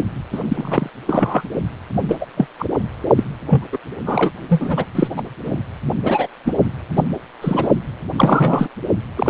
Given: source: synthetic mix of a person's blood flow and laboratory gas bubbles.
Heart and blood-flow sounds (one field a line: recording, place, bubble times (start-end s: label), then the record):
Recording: Doppler ultrasound of blood flow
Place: precordium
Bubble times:
0.32-0.43 s: bubbles
0.48-0.89 s: bubbles
1.06-1.42 s: bubbles
2.08-2.15 s: bubbles
2.21-2.26 s: bubbles
2.36-2.46 s: bubbles
2.58-2.65 s: bubbles
3.16-3.23 s: bubbles
3.49-3.66 s: bubbles
3.72-3.77 s: bubbles
4.05-4.30 s: bubbles
4.49-4.85 s: bubbles
4.95-5.08 s: bubbles
5.17-5.22 s: bubbles
5.44-5.58 s: bubbles
6.04-6.27 s: bubbles
6.45-6.54 s: bubbles
6.96-7.04 s: bubbles
7.42-7.69 s: bubbles
8.17-8.68 s: bubbles
9.16-9.30 s: bubbles
From the record:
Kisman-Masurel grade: 243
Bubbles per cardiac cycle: several, 3 to 8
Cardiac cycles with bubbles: 100%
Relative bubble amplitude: loud (0.450 to 0.775)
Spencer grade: 3 (all of the cardiac periods contain showers or single bubble signals, but not dominating or overriding the cardiac motion signals)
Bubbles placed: only in the low amplitude regions of the cardiac cycle